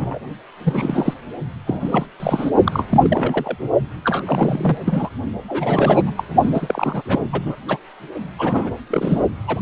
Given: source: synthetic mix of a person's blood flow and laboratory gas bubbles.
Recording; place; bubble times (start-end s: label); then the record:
Doppler ultrasound of blood flow; precordium
0.00-0.19 s: bubbles
0.63-1.14 s: bubbles
1.66-2.06 s: bubbles
2.20-2.50 s: bubbles
2.64-2.85 s: bubbles
2.90-3.58 s: bubbles
4.04-4.22 s: bubbles
4.25-4.78 s: bubbles
4.85-5.09 s: bubbles
5.47-6.03 s: bubbles
6.06-6.15 s: bubbles
6.17-6.24 s: bubbles
6.42-7.02 s: bubbles
7.08-7.28 s: bubbles
7.31-7.57 s: bubbles
7.68-7.78 s: bubbles
8.38-8.71 s: bubbles
8.90-9.21 s: bubbles
9.46-9.61 s: bubbles
From the record:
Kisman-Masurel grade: 342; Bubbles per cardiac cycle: rolling drumbeat, 9 or more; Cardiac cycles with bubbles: 100%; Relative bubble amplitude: moderate (0.250 to 0.450); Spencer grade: 3 (all of the cardiac periods contain showers or single bubble signals, but not dominating or overriding the cardiac motion signals); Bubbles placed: only in the low amplitude regions of the cardiac cycle